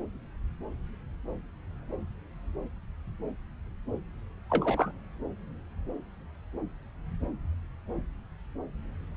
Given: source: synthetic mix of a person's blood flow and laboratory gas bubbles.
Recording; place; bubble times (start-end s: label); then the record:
Doppler ultrasound of blood flow; subclavian vein
4.49-4.91 s: bubbles
From the record:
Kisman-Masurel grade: 211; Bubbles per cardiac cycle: several, 3 to 8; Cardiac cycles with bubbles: 1 to 10%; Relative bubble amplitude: barely perceptible (0.100 to 0.250); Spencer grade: 1 (occasional bubble signal discernible with the cardiac motion signal, with majority of cardiac periods free of bubbles); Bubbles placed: anywhere in the cardiac cycle